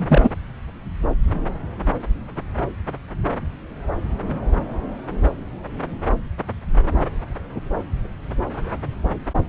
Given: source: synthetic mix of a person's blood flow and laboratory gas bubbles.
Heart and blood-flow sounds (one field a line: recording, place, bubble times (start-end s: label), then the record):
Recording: Doppler ultrasound of blood flow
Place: subclavian vein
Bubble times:
0.00-0.30 s: bubbles
From the record:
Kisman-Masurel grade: 213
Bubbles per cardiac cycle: several, 3 to 8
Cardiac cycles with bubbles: 1 to 10%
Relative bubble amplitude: loud (0.450 to 0.775)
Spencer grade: 1 (occasional bubble signal discernible with the cardiac motion signal, with majority of cardiac periods free of bubbles)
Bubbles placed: anywhere in the cardiac cycle